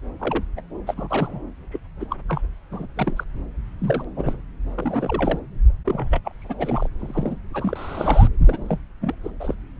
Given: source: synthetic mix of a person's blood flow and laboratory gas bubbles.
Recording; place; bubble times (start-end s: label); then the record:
Doppler ultrasound of blood flow; subclavian vein
0.19-0.44 s: bubbles
0.56-0.60 s: bubbles
0.86-0.94 s: bubbles
0.96-1.41 s: bubbles
1.71-1.79 s: bubbles
2.00-2.06 s: bubbles
2.10-2.16 s: bubbles
2.29-2.42 s: bubbles
2.71-2.87 s: bubbles
2.96-3.24 s: bubbles
3.79-4.04 s: bubbles
4.16-4.40 s: bubbles
4.74-5.39 s: bubbles
5.85-6.20 s: bubbles
6.23-6.31 s: bubbles
6.42-6.88 s: bubbles
6.99-7.36 s: bubbles
7.53-8.28 s: bubbles
8.38-8.79 s: bubbles
9.01-9.14 s: bubbles
9.24-9.30 s: bubbles
9.39-9.54 s: bubbles
From the record:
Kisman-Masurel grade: 342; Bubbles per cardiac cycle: rolling drumbeat, 9 or more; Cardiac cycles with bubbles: 100%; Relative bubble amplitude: moderate (0.250 to 0.450); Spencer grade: 3 (all of the cardiac periods contain showers or single bubble signals, but not dominating or overriding the cardiac motion signals); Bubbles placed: anywhere in the cardiac cycle